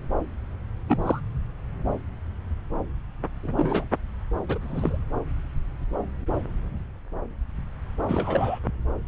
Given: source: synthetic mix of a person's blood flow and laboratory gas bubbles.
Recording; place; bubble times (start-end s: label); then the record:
Doppler ultrasound of blood flow; subclavian vein
0.88-1.21 s: bubbles
3.43-3.85 s: bubbles
4.49-4.58 s: bubbles
4.61-4.98 s: bubbles
8.08-8.59 s: bubbles
From the record:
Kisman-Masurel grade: 221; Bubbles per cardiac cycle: several, 3 to 8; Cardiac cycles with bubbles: 10 to 50%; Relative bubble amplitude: barely perceptible (0.100 to 0.250); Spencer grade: 2 (many but less than half of the cardiac periods contain bubble signals, singularly or in groups); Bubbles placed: anywhere in the cardiac cycle